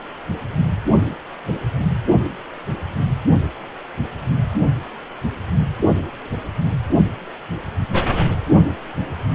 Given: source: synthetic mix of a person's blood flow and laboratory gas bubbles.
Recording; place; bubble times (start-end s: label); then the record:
Doppler ultrasound of blood flow; precordium
no bubbles
From the record:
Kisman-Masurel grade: 000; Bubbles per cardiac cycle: 0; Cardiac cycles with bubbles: 0%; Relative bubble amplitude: no bubbles discernible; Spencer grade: 0 (complete lack of bubble signals)